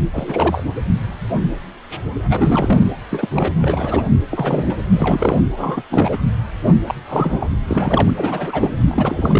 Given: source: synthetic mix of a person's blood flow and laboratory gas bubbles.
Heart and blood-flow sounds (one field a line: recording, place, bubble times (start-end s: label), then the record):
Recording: Doppler ultrasound of blood flow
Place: precordium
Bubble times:
0.12-0.64 s: bubbles
2.29-2.92 s: bubbles
3.09-3.28 s: bubbles
3.31-3.52 s: bubbles
3.60-4.08 s: bubbles
4.30-4.75 s: bubbles
4.92-5.40 s: bubbles
5.57-5.82 s: bubbles
5.90-6.21 s: bubbles
6.87-6.95 s: bubbles
7.08-7.48 s: bubbles
7.67-8.10 s: bubbles
8.17-8.74 s: bubbles
8.83-9.40 s: bubbles
From the record:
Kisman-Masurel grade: 332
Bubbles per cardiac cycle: rolling drumbeat, 9 or more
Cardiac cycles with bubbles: 50 to 99%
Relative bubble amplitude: moderate (0.250 to 0.450)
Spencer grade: 3 (all of the cardiac periods contain showers or single bubble signals, but not dominating or overriding the cardiac motion signals)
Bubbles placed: anywhere in the cardiac cycle